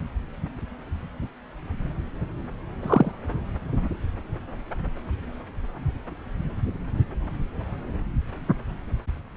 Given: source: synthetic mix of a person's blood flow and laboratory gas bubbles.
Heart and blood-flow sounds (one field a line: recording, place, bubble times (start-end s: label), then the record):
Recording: Doppler ultrasound of blood flow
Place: subclavian vein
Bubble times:
2.82-3.11 s: bubbles
From the record:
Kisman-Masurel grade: 112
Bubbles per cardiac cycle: 1 to 2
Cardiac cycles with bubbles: 1 to 10%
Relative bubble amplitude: moderate (0.250 to 0.450)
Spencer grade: 1 (occasional bubble signal discernible with the cardiac motion signal, with majority of cardiac periods free of bubbles)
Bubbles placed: anywhere in the cardiac cycle